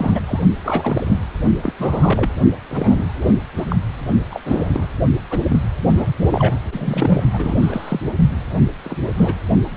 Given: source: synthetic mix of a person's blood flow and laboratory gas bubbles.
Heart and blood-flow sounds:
Doppler ultrasound of blood flow; precordium
0.00-0.20 s: bubbles
0.27-0.40 s: bubbles
0.64-1.22 s: bubbles
1.62-1.73 s: bubbles
1.79-2.30 s: bubbles
2.70-3.13 s: bubbles
3.21-3.35 s: bubbles
3.55-3.65 s: bubbles
3.68-3.76 s: bubbles
4.30-4.41 s: bubbles
4.44-4.88 s: bubbles
5.30-5.39 s: bubbles
5.44-5.60 s: bubbles
5.89-6.10 s: bubbles
6.30-6.58 s: bubbles
6.71-7.23 s: bubbles
7.33-8.00 s: bubbles
8.83-8.98 s: bubbles
9.07-9.12 s: bubbles
9.16-9.35 s: bubbles
9.71-9.77 s: bubbles
From the record:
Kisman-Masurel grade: 242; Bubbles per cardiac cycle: several, 3 to 8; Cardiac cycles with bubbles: 100%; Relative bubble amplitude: moderate (0.250 to 0.450); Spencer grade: 3 (all of the cardiac periods contain showers or single bubble signals, but not dominating or overriding the cardiac motion signals); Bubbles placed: only in the low amplitude regions of the cardiac cycle

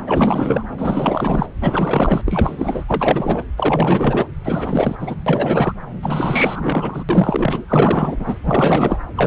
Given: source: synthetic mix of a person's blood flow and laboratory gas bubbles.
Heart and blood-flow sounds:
Doppler ultrasound of blood flow; subclavian vein
0.07-0.64 s: bubbles
0.78-1.46 s: bubbles
1.60-2.21 s: bubbles
2.25-2.85 s: bubbles
2.88-3.44 s: bubbles
3.57-4.28 s: bubbles
4.45-4.96 s: bubbles
5.00-5.16 s: bubbles
5.26-5.72 s: bubbles
6.02-7.04 s: bubbles
7.09-7.64 s: bubbles
7.68-8.34 s: bubbles
8.43-8.97 s: bubbles
9.15-9.27 s: bubbles
From the record:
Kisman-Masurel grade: 444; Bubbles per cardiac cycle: continuous sound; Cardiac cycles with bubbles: 100%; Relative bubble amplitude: maximal (0.775 to 0.999); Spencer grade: 4 (maximum detectable bubble signal sounding continuously throughout systole and diastole of every cardiac period, and overriding the amplitude of the normal cardiac signals); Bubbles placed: anywhere in the cardiac cycle

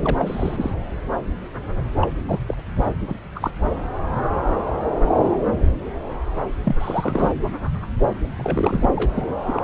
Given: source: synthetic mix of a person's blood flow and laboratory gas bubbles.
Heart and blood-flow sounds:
Doppler ultrasound of blood flow; subclavian vein
0.03-0.71 s: bubbles
2.01-2.08 s: bubbles
2.26-2.40 s: bubbles
2.48-2.56 s: bubbles
3.08-3.16 s: bubbles
3.35-3.51 s: bubbles
6.64-6.76 s: bubbles
6.79-7.33 s: bubbles
8.36-8.88 s: bubbles
8.96-9.12 s: bubbles
9.16-9.30 s: bubbles
9.45-9.64 s: bubbles
From the record:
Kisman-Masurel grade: 232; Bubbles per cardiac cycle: several, 3 to 8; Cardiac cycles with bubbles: 50 to 99%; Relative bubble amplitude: moderate (0.250 to 0.450); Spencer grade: 3 (all of the cardiac periods contain showers or single bubble signals, but not dominating or overriding the cardiac motion signals); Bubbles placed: anywhere in the cardiac cycle

